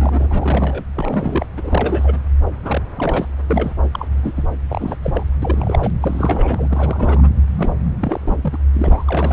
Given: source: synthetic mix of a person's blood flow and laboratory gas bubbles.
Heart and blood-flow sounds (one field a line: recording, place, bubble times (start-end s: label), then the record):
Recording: Doppler ultrasound of blood flow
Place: subclavian vein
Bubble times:
0.00-0.84 s: bubbles
0.96-1.47 s: bubbles
1.57-2.19 s: bubbles
2.48-2.82 s: bubbles
2.94-3.28 s: bubbles
3.46-3.72 s: bubbles
3.91-4.08 s: bubbles
4.21-4.33 s: bubbles
4.37-4.46 s: bubbles
4.68-4.97 s: bubbles
5.02-5.23 s: bubbles
5.42-5.91 s: bubbles
6.01-7.29 s: bubbles
7.57-7.72 s: bubbles
7.99-8.59 s: bubbles
8.74-9.33 s: bubbles
From the record:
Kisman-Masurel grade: 342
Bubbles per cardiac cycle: rolling drumbeat, 9 or more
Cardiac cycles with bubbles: 100%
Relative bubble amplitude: moderate (0.250 to 0.450)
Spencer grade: 3 (all of the cardiac periods contain showers or single bubble signals, but not dominating or overriding the cardiac motion signals)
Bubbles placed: anywhere in the cardiac cycle